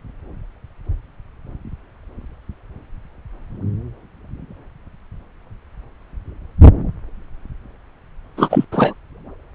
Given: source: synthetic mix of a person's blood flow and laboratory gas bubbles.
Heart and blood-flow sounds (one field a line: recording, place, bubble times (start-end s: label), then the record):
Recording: Doppler ultrasound of blood flow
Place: subclavian vein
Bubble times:
8.37-8.65 s: bubbles
8.71-8.93 s: bubbles
From the record:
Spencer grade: 1 (occasional bubble signal discernible with the cardiac motion signal, with majority of cardiac periods free of bubbles)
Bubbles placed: anywhere in the cardiac cycle